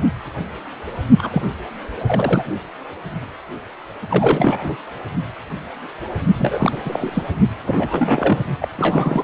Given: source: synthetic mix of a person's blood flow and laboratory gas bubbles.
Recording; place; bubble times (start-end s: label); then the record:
Doppler ultrasound of blood flow; precordium
1.18-1.42 s: bubbles
2.06-2.45 s: bubbles
4.09-4.77 s: bubbles
6.33-6.82 s: bubbles
6.84-7.29 s: bubbles
7.66-8.42 s: bubbles
8.60-8.69 s: bubbles
8.77-9.24 s: bubbles
From the record:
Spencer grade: 3 (all of the cardiac periods contain showers or single bubble signals, but not dominating or overriding the cardiac motion signals); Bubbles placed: only in the low amplitude regions of the cardiac cycle